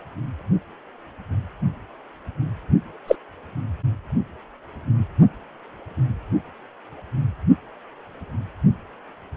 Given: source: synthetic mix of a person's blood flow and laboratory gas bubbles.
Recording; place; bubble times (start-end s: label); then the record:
Doppler ultrasound of blood flow; precordium
3.07-3.15 s: bubbles
From the record:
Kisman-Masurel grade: 113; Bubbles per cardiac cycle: 1 to 2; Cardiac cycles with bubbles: 1 to 10%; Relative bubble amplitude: loud (0.450 to 0.775); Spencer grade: 1 (occasional bubble signal discernible with the cardiac motion signal, with majority of cardiac periods free of bubbles); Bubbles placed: only in the low amplitude regions of the cardiac cycle